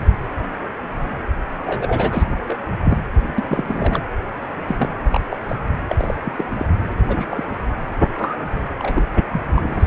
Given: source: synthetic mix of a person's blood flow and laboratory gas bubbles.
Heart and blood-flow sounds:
Doppler ultrasound of blood flow; precordium
1.66-2.24 s: bubbles
2.45-2.56 s: bubbles
2.84-2.98 s: bubbles
3.38-4.01 s: bubbles
4.67-4.89 s: bubbles
5.12-5.21 s: bubbles
5.29-5.38 s: bubbles
5.48-5.55 s: bubbles
5.88-5.96 s: bubbles
5.98-6.14 s: bubbles
6.25-6.33 s: bubbles
6.35-6.45 s: bubbles
6.53-6.65 s: bubbles
6.92-6.98 s: bubbles
7.08-7.27 s: bubbles
7.30-7.44 s: bubbles
8.18-8.36 s: bubbles
8.79-9.03 s: bubbles
9.31-9.41 s: bubbles
9.57-9.87 s: bubbles
From the record:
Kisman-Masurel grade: 232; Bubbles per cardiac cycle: several, 3 to 8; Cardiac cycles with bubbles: 50 to 99%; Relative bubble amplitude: moderate (0.250 to 0.450); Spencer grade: 3 (all of the cardiac periods contain showers or single bubble signals, but not dominating or overriding the cardiac motion signals); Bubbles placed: anywhere in the cardiac cycle

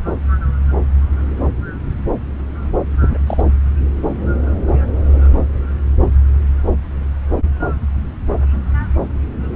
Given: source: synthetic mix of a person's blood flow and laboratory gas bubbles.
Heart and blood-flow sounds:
Doppler ultrasound of blood flow; subclavian vein
3.00-3.18 s: bubbles
3.27-3.42 s: bubbles
From the record:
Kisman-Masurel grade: 212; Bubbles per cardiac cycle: several, 3 to 8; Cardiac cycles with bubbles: 1 to 10%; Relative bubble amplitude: moderate (0.250 to 0.450); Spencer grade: 1 (occasional bubble signal discernible with the cardiac motion signal, with majority of cardiac periods free of bubbles); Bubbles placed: anywhere in the cardiac cycle

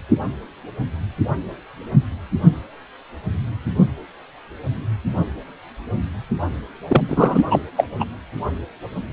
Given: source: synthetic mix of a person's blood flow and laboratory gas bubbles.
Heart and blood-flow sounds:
Doppler ultrasound of blood flow; precordium
6.88-7.03 s: bubbles
7.08-7.46 s: bubbles
7.50-7.59 s: bubbles
7.76-7.84 s: bubbles
8.00-8.05 s: bubbles
From the record:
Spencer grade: 1 (occasional bubble signal discernible with the cardiac motion signal, with majority of cardiac periods free of bubbles); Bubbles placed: anywhere in the cardiac cycle

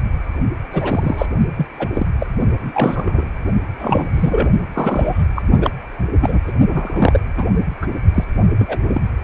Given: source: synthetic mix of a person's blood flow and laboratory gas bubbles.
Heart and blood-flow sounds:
Doppler ultrasound of blood flow; precordium
0.72-1.26 s: bubbles
1.57-1.66 s: bubbles
1.78-1.89 s: bubbles
1.93-2.07 s: bubbles
2.20-2.27 s: bubbles
2.60-3.24 s: bubbles
3.79-4.08 s: bubbles
4.13-4.49 s: bubbles
4.74-5.24 s: bubbles
5.36-5.42 s: bubbles
5.58-5.71 s: bubbles
6.22-6.40 s: bubbles
6.47-6.53 s: bubbles
6.68-7.20 s: bubbles
7.37-7.46 s: bubbles
7.81-7.87 s: bubbles
8.14-8.24 s: bubbles
8.59-8.79 s: bubbles
8.88-9.01 s: bubbles
From the record:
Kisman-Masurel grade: 242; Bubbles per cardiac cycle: several, 3 to 8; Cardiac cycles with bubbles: 100%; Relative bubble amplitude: moderate (0.250 to 0.450); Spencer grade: 3 (all of the cardiac periods contain showers or single bubble signals, but not dominating or overriding the cardiac motion signals); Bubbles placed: only in the low amplitude regions of the cardiac cycle

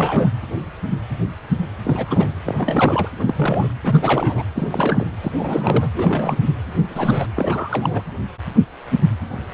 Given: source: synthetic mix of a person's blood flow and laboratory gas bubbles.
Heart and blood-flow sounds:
Doppler ultrasound of blood flow; precordium
0.00-0.28 s: bubbles
1.84-2.28 s: bubbles
2.46-3.08 s: bubbles
3.17-3.70 s: bubbles
3.83-3.98 s: bubbles
4.02-4.49 s: bubbles
4.55-5.06 s: bubbles
5.22-5.32 s: bubbles
5.37-5.90 s: bubbles
5.95-6.40 s: bubbles
6.90-7.27 s: bubbles
7.35-8.03 s: bubbles
From the record:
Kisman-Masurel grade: 332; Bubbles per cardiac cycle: rolling drumbeat, 9 or more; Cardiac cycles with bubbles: 50 to 99%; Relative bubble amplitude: moderate (0.250 to 0.450); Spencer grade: 3 (all of the cardiac periods contain showers or single bubble signals, but not dominating or overriding the cardiac motion signals); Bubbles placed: anywhere in the cardiac cycle

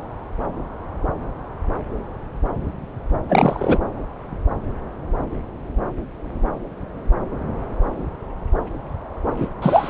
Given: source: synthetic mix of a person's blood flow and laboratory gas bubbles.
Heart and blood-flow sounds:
Doppler ultrasound of blood flow; subclavian vein
3.29-3.79 s: bubbles
9.37-9.48 s: bubbles
9.62-9.90 s: bubbles
From the record:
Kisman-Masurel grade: 213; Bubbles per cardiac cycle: several, 3 to 8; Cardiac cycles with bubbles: 1 to 10%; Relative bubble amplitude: loud (0.450 to 0.775); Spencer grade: 1 (occasional bubble signal discernible with the cardiac motion signal, with majority of cardiac periods free of bubbles); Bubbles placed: anywhere in the cardiac cycle

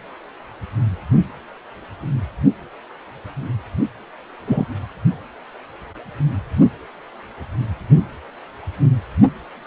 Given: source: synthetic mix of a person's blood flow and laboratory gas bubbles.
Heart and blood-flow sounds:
Doppler ultrasound of blood flow; precordium
4.47-4.66 s: bubbles
From the record:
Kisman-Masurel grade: 113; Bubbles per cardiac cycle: 1 to 2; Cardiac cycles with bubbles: 1 to 10%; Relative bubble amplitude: loud (0.450 to 0.775); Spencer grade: 1 (occasional bubble signal discernible with the cardiac motion signal, with majority of cardiac periods free of bubbles); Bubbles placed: anywhere in the cardiac cycle

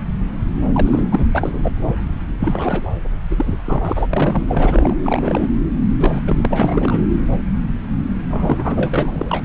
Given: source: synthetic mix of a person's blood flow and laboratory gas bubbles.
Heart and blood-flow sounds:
Doppler ultrasound of blood flow; subclavian vein
0.74-1.06 s: bubbles
1.10-1.26 s: bubbles
1.32-1.72 s: bubbles
2.39-2.91 s: bubbles
3.30-3.58 s: bubbles
3.65-4.07 s: bubbles
4.09-4.45 s: bubbles
4.47-4.96 s: bubbles
5.00-5.46 s: bubbles
5.99-6.21 s: bubbles
6.25-6.46 s: bubbles
6.49-6.98 s: bubbles
8.30-9.45 s: bubbles
From the record:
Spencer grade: 3 (all of the cardiac periods contain showers or single bubble signals, but not dominating or overriding the cardiac motion signals); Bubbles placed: anywhere in the cardiac cycle

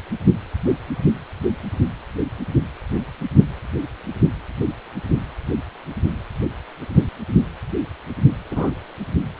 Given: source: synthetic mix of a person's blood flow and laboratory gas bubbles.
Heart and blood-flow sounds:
Doppler ultrasound of blood flow; precordium
8.50-8.71 s: bubbles
From the record:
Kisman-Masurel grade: 122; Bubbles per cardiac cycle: 1 to 2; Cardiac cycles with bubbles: 10 to 50%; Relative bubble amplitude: moderate (0.250 to 0.450); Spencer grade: 2 (many but less than half of the cardiac periods contain bubble signals, singularly or in groups); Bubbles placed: anywhere in the cardiac cycle

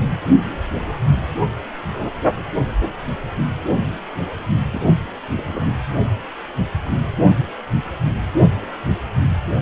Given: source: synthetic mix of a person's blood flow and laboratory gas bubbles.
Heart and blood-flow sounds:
Doppler ultrasound of blood flow; precordium
4.73-4.82 s: bubbles
5.35-5.73 s: bubbles
From the record:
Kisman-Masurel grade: 111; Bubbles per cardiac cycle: 1 to 2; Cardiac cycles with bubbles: 1 to 10%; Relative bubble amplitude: barely perceptible (0.100 to 0.250); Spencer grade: 1 (occasional bubble signal discernible with the cardiac motion signal, with majority of cardiac periods free of bubbles); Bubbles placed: anywhere in the cardiac cycle

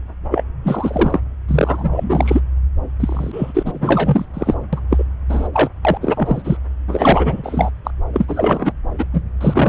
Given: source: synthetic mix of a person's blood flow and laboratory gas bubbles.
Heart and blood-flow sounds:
Doppler ultrasound of blood flow; subclavian vein
0.31-0.43 s: bubbles
0.64-1.20 s: bubbles
1.48-1.89 s: bubbles
1.92-2.04 s: bubbles
2.09-2.40 s: bubbles
2.99-4.25 s: bubbles
4.33-4.54 s: bubbles
4.73-4.79 s: bubbles
4.90-5.04 s: bubbles
5.29-5.48 s: bubbles
5.53-5.69 s: bubbles
5.85-5.98 s: bubbles
6.00-6.57 s: bubbles
6.88-7.70 s: bubbles
7.84-7.91 s: bubbles
8.13-8.73 s: bubbles
8.98-9.05 s: bubbles
9.13-9.21 s: bubbles
9.40-9.69 s: bubbles
From the record:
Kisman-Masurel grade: 333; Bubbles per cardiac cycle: rolling drumbeat, 9 or more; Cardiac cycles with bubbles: 50 to 99%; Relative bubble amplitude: loud (0.450 to 0.775); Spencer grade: 3 (all of the cardiac periods contain showers or single bubble signals, but not dominating or overriding the cardiac motion signals); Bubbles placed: anywhere in the cardiac cycle

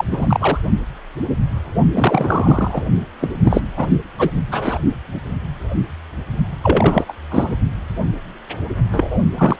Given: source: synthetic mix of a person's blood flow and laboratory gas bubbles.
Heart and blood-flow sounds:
Doppler ultrasound of blood flow; precordium
0.00-0.04 s: bubbles
0.11-0.58 s: bubbles
1.94-2.83 s: bubbles
3.20-3.30 s: bubbles
3.44-3.62 s: bubbles
3.76-3.87 s: bubbles
4.18-4.30 s: bubbles
4.51-4.79 s: bubbles
6.62-7.05 s: bubbles
7.08-7.13 s: bubbles
7.30-7.55 s: bubbles
8.92-9.18 s: bubbles
9.38-9.56 s: bubbles
From the record:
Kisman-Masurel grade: 333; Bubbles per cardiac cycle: rolling drumbeat, 9 or more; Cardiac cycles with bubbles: 50 to 99%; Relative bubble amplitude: loud (0.450 to 0.775); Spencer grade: 3 (all of the cardiac periods contain showers or single bubble signals, but not dominating or overriding the cardiac motion signals); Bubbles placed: only in the low amplitude regions of the cardiac cycle

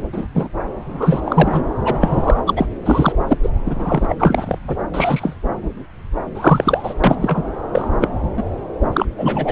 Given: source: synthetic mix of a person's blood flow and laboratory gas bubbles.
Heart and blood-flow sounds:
Doppler ultrasound of blood flow; subclavian vein
0.12-0.27 s: bubbles
0.34-0.48 s: bubbles
0.90-1.21 s: bubbles
1.24-1.64 s: bubbles
1.84-2.41 s: bubbles
2.46-2.67 s: bubbles
2.85-3.12 s: bubbles
3.27-3.38 s: bubbles
3.42-3.50 s: bubbles
3.66-4.06 s: bubbles
4.08-4.16 s: bubbles
4.19-4.58 s: bubbles
4.67-4.75 s: bubbles
4.93-5.35 s: bubbles
6.34-6.94 s: bubbles
7.04-7.44 s: bubbles
7.74-7.88 s: bubbles
8.00-8.08 s: bubbles
8.36-8.43 s: bubbles
8.93-9.06 s: bubbles
9.18-9.52 s: bubbles
From the record:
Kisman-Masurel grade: 243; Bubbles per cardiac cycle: several, 3 to 8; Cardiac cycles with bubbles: 100%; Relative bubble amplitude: loud (0.450 to 0.775); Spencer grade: 3 (all of the cardiac periods contain showers or single bubble signals, but not dominating or overriding the cardiac motion signals); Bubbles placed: anywhere in the cardiac cycle

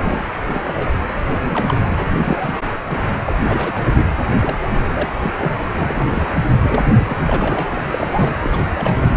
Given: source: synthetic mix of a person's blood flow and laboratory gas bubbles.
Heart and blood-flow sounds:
Doppler ultrasound of blood flow; precordium
0.00-0.25 s: bubbles
0.45-0.61 s: bubbles
0.64-0.92 s: bubbles
1.24-1.76 s: bubbles
1.86-1.91 s: bubbles
1.93-2.07 s: bubbles
2.22-2.60 s: bubbles
2.65-2.70 s: bubbles
2.88-2.99 s: bubbles
3.21-3.34 s: bubbles
3.47-3.89 s: bubbles
3.93-4.09 s: bubbles
4.42-4.56 s: bubbles
4.60-5.11 s: bubbles
5.21-5.31 s: bubbles
5.38-5.52 s: bubbles
5.78-6.26 s: bubbles
6.56-6.84 s: bubbles
6.96-7.15 s: bubbles
7.26-8.33 s: bubbles
8.41-8.69 s: bubbles
8.75-9.12 s: bubbles
From the record:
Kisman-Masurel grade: 342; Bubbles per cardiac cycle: rolling drumbeat, 9 or more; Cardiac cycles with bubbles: 100%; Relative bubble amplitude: moderate (0.250 to 0.450); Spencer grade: 3 (all of the cardiac periods contain showers or single bubble signals, but not dominating or overriding the cardiac motion signals); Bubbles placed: anywhere in the cardiac cycle

